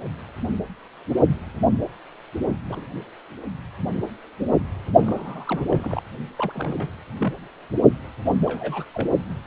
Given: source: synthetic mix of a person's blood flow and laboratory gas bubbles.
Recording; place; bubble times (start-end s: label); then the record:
Doppler ultrasound of blood flow; precordium
2.69-2.88 s: bubbles
5.01-5.65 s: bubbles
5.68-6.02 s: bubbles
6.37-6.92 s: bubbles
7.18-7.33 s: bubbles
8.25-8.38 s: bubbles
8.46-8.85 s: bubbles
8.94-9.09 s: bubbles
From the record:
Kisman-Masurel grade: 221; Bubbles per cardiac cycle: several, 3 to 8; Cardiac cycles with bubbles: 10 to 50%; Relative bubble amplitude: barely perceptible (0.100 to 0.250); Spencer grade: 2 (many but less than half of the cardiac periods contain bubble signals, singularly or in groups); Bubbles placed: only in the low amplitude regions of the cardiac cycle